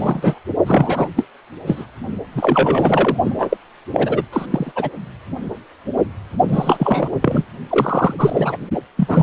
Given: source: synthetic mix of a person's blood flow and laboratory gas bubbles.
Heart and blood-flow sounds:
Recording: Doppler ultrasound of blood flow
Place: precordium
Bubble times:
0.00-0.39 s: bubbles
0.67-1.09 s: bubbles
1.16-1.26 s: bubbles
1.66-1.85 s: bubbles
2.32-3.17 s: bubbles
3.24-3.57 s: bubbles
3.92-4.22 s: bubbles
4.33-4.46 s: bubbles
4.50-4.71 s: bubbles
4.75-4.89 s: bubbles
6.48-7.08 s: bubbles
7.21-7.45 s: bubbles
7.70-8.14 s: bubbles
8.19-8.56 s: bubbles
8.96-9.23 s: bubbles
From the record:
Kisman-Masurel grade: 333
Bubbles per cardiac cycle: rolling drumbeat, 9 or more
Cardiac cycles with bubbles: 50 to 99%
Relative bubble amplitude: loud (0.450 to 0.775)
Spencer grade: 3 (all of the cardiac periods contain showers or single bubble signals, but not dominating or overriding the cardiac motion signals)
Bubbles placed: only in the low amplitude regions of the cardiac cycle

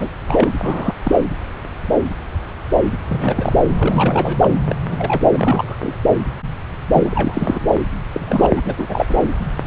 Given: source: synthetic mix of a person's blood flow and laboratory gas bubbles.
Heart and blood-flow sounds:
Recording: Doppler ultrasound of blood flow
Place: subclavian vein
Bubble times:
0.00-0.09 s: bubbles
0.28-0.49 s: bubbles
0.62-0.94 s: bubbles
1.03-1.17 s: bubbles
3.08-3.54 s: bubbles
3.78-4.36 s: bubbles
4.40-4.50 s: bubbles
4.67-4.75 s: bubbles
4.88-5.27 s: bubbles
5.30-5.78 s: bubbles
5.80-5.93 s: bubbles
6.92-7.70 s: bubbles
8.11-8.51 s: bubbles
8.55-8.61 s: bubbles
8.64-9.05 s: bubbles
9.08-9.15 s: bubbles
9.21-9.28 s: bubbles
From the record:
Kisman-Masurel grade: 232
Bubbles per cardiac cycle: several, 3 to 8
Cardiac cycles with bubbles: 50 to 99%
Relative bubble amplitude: moderate (0.250 to 0.450)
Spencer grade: 3 (all of the cardiac periods contain showers or single bubble signals, but not dominating or overriding the cardiac motion signals)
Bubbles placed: anywhere in the cardiac cycle

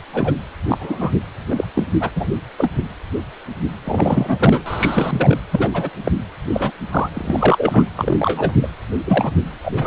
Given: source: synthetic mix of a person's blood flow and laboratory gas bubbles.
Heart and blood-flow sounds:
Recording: Doppler ultrasound of blood flow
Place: precordium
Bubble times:
0.14-0.33 s: bubbles
0.67-1.11 s: bubbles
1.49-1.66 s: bubbles
1.75-1.84 s: bubbles
2.00-2.10 s: bubbles
2.16-2.32 s: bubbles
2.58-2.70 s: bubbles
3.84-4.62 s: bubbles
4.66-5.38 s: bubbles
5.51-5.89 s: bubbles
6.04-6.11 s: bubbles
6.52-6.71 s: bubbles
6.91-7.10 s: bubbles
7.14-7.84 s: bubbles
7.96-8.52 s: bubbles
8.62-8.68 s: bubbles
9.06-9.32 s: bubbles
9.62-9.87 s: bubbles
From the record:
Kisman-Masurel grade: 232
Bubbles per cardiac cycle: several, 3 to 8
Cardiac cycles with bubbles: 50 to 99%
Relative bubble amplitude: moderate (0.250 to 0.450)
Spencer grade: 3 (all of the cardiac periods contain showers or single bubble signals, but not dominating or overriding the cardiac motion signals)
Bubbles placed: anywhere in the cardiac cycle

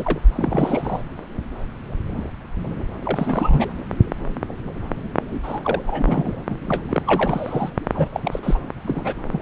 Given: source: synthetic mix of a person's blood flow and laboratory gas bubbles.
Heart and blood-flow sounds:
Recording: Doppler ultrasound of blood flow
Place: subclavian vein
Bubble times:
0.00-0.20 s: bubbles
0.35-1.03 s: bubbles
3.03-3.67 s: bubbles
5.30-5.40 s: bubbles
5.43-5.61 s: bubbles
5.63-5.82 s: bubbles
5.87-6.42 s: bubbles
6.50-6.57 s: bubbles
6.66-6.82 s: bubbles
6.90-7.70 s: bubbles
7.94-8.09 s: bubbles
8.13-8.39 s: bubbles
8.43-8.59 s: bubbles
8.85-9.14 s: bubbles
9.31-9.39 s: bubbles
From the record:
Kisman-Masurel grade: 332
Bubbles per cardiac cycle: rolling drumbeat, 9 or more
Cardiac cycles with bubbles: 50 to 99%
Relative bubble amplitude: moderate (0.250 to 0.450)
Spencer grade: 3 (all of the cardiac periods contain showers or single bubble signals, but not dominating or overriding the cardiac motion signals)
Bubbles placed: anywhere in the cardiac cycle

